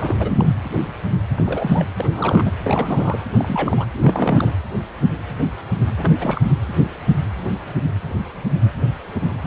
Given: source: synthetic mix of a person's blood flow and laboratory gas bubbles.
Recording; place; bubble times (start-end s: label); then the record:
Doppler ultrasound of blood flow; precordium
0.00-0.48 s: bubbles
1.36-1.85 s: bubbles
1.96-2.51 s: bubbles
2.63-3.23 s: bubbles
3.37-3.86 s: bubbles
3.93-4.53 s: bubbles
5.98-6.42 s: bubbles
From the record:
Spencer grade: 3 (all of the cardiac periods contain showers or single bubble signals, but not dominating or overriding the cardiac motion signals); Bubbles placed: anywhere in the cardiac cycle